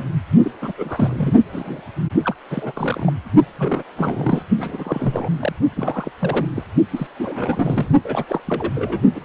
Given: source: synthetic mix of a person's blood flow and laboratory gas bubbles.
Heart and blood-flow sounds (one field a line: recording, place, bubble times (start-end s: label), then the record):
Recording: Doppler ultrasound of blood flow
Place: precordium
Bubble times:
0.00-0.03 s: bubbles
0.42-0.52 s: bubbles
0.61-1.33 s: bubbles
1.52-1.81 s: bubbles
2.24-2.35 s: bubbles
2.50-3.13 s: bubbles
3.58-3.82 s: bubbles
3.96-4.42 s: bubbles
4.57-5.28 s: bubbles
5.39-5.52 s: bubbles
5.75-6.11 s: bubbles
6.21-6.47 s: bubbles
6.55-6.64 s: bubbles
6.92-7.07 s: bubbles
7.18-7.90 s: bubbles
8.04-8.25 s: bubbles
8.28-8.41 s: bubbles
8.47-9.02 s: bubbles
9.15-9.21 s: bubbles
From the record:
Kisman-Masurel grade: 342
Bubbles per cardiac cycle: rolling drumbeat, 9 or more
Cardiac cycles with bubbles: 100%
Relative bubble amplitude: moderate (0.250 to 0.450)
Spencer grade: 3 (all of the cardiac periods contain showers or single bubble signals, but not dominating or overriding the cardiac motion signals)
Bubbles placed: only in the low amplitude regions of the cardiac cycle